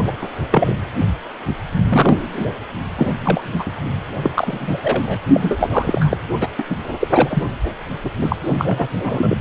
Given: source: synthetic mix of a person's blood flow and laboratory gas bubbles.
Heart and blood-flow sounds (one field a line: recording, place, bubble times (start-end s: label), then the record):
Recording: Doppler ultrasound of blood flow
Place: precordium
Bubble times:
0.05-0.12 s: bubbles
0.21-0.30 s: bubbles
0.51-0.75 s: bubbles
1.89-2.17 s: bubbles
2.33-2.48 s: bubbles
2.96-3.07 s: bubbles
3.19-3.55 s: bubbles
3.59-3.72 s: bubbles
4.22-4.78 s: bubbles
4.82-5.19 s: bubbles
5.34-6.17 s: bubbles
6.40-6.47 s: bubbles
6.59-6.63 s: bubbles
6.70-6.76 s: bubbles
6.99-7.07 s: bubbles
7.13-7.43 s: bubbles
8.04-8.09 s: bubbles
8.21-8.36 s: bubbles
8.58-8.88 s: bubbles
8.96-9.36 s: bubbles
From the record:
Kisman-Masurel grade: 233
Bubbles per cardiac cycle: several, 3 to 8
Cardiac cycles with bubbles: 50 to 99%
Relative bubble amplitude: loud (0.450 to 0.775)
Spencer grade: 3 (all of the cardiac periods contain showers or single bubble signals, but not dominating or overriding the cardiac motion signals)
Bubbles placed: anywhere in the cardiac cycle